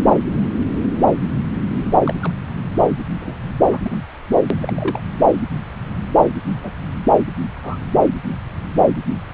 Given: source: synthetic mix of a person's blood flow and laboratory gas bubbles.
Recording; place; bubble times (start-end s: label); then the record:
Doppler ultrasound of blood flow; subclavian vein
2.04-2.15 s: bubbles
2.21-2.32 s: bubbles
3.20-3.37 s: bubbles
3.69-3.78 s: bubbles
3.82-3.98 s: bubbles
4.60-5.01 s: bubbles
6.55-6.70 s: bubbles
7.62-7.77 s: bubbles
From the record:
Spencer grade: 2 (many but less than half of the cardiac periods contain bubble signals, singularly or in groups); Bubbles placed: anywhere in the cardiac cycle